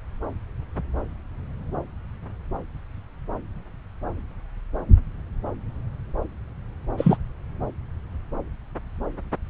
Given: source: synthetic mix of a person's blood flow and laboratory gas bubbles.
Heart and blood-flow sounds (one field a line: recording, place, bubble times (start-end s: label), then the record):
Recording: Doppler ultrasound of blood flow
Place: subclavian vein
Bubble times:
6.97-7.17 s: bubbles
From the record:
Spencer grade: 1 (occasional bubble signal discernible with the cardiac motion signal, with majority of cardiac periods free of bubbles)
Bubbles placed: anywhere in the cardiac cycle